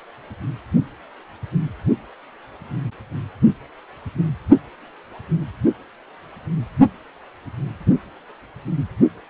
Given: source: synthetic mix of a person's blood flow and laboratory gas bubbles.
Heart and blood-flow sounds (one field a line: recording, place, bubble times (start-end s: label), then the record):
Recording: Doppler ultrasound of blood flow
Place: precordium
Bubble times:
no bubbles
From the record:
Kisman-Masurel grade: 000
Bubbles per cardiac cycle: 0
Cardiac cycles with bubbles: 0%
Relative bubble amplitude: no bubbles discernible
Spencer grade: 0 (complete lack of bubble signals)